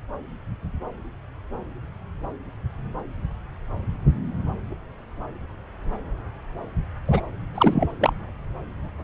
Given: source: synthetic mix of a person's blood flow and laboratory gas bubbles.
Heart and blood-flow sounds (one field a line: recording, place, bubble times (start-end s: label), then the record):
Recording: Doppler ultrasound of blood flow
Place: subclavian vein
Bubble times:
7.08-7.21 s: bubbles
7.54-7.88 s: bubbles
8.00-8.13 s: bubbles
From the record:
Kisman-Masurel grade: 213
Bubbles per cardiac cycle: several, 3 to 8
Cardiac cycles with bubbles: 1 to 10%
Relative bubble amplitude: loud (0.450 to 0.775)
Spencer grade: 1 (occasional bubble signal discernible with the cardiac motion signal, with majority of cardiac periods free of bubbles)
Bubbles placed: anywhere in the cardiac cycle